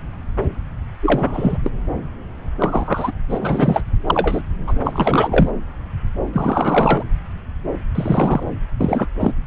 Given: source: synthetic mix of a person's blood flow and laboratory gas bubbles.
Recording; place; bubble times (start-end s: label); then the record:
Doppler ultrasound of blood flow; subclavian vein
1.02-1.58 s: bubbles
1.63-1.72 s: bubbles
2.58-3.12 s: bubbles
3.29-3.80 s: bubbles
4.06-4.42 s: bubbles
4.67-4.74 s: bubbles
4.84-5.50 s: bubbles
6.33-7.03 s: bubbles
7.95-8.43 s: bubbles
8.79-9.07 s: bubbles
9.20-9.32 s: bubbles
From the record:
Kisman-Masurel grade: 233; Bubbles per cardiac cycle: several, 3 to 8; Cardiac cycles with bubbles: 50 to 99%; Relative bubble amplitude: loud (0.450 to 0.775); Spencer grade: 3 (all of the cardiac periods contain showers or single bubble signals, but not dominating or overriding the cardiac motion signals); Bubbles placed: anywhere in the cardiac cycle